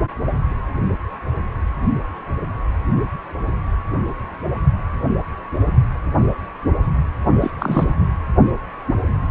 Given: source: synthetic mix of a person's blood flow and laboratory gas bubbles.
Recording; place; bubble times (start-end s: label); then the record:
Doppler ultrasound of blood flow; precordium
7.41-7.51 s: bubbles
7.58-7.95 s: bubbles
From the record:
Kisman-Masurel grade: 212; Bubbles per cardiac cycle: several, 3 to 8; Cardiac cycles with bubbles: 1 to 10%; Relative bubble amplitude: moderate (0.250 to 0.450); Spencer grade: 1 (occasional bubble signal discernible with the cardiac motion signal, with majority of cardiac periods free of bubbles); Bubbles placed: anywhere in the cardiac cycle